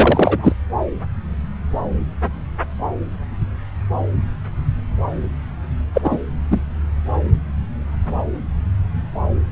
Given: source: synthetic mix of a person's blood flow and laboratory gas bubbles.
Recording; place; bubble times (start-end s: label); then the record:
Doppler ultrasound of blood flow; subclavian vein
0.00-0.53 s: bubbles
5.93-6.01 s: bubbles
6.04-6.17 s: bubbles
6.50-6.61 s: bubbles
From the record:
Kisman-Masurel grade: 223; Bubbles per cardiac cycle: several, 3 to 8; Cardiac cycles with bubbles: 10 to 50%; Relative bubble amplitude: loud (0.450 to 0.775); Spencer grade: 2 (many but less than half of the cardiac periods contain bubble signals, singularly or in groups); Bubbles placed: anywhere in the cardiac cycle